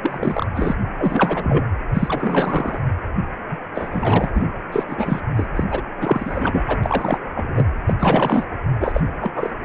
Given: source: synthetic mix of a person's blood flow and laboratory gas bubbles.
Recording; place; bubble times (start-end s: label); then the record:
Doppler ultrasound of blood flow; precordium
0.02-0.46 s: bubbles
0.54-0.75 s: bubbles
0.98-1.64 s: bubbles
1.94-2.80 s: bubbles
3.50-3.57 s: bubbles
3.75-4.32 s: bubbles
4.34-4.52 s: bubbles
4.72-4.83 s: bubbles
4.88-5.20 s: bubbles
5.36-5.46 s: bubbles
5.55-5.64 s: bubbles
5.71-5.81 s: bubbles
6.01-6.76 s: bubbles
6.82-7.19 s: bubbles
7.34-7.65 s: bubbles
7.87-7.94 s: bubbles
7.99-8.44 s: bubbles
8.80-9.01 s: bubbles
9.21-9.50 s: bubbles
9.63-9.65 s: bubbles
From the record:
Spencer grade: 3 (all of the cardiac periods contain showers or single bubble signals, but not dominating or overriding the cardiac motion signals); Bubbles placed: anywhere in the cardiac cycle